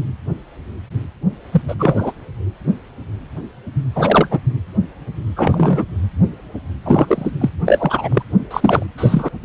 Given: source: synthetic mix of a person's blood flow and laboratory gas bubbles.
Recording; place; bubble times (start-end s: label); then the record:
Doppler ultrasound of blood flow; precordium
1.52-1.61 s: bubbles
1.68-1.74 s: bubbles
1.78-2.12 s: bubbles
3.95-4.28 s: bubbles
4.31-4.39 s: bubbles
5.36-5.84 s: bubbles
6.85-7.31 s: bubbles
7.40-7.50 s: bubbles
7.65-8.23 s: bubbles
8.51-8.86 s: bubbles
8.97-9.29 s: bubbles
From the record:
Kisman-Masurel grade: 233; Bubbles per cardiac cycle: several, 3 to 8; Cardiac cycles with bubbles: 50 to 99%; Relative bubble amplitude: loud (0.450 to 0.775); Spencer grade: 3 (all of the cardiac periods contain showers or single bubble signals, but not dominating or overriding the cardiac motion signals); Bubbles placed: anywhere in the cardiac cycle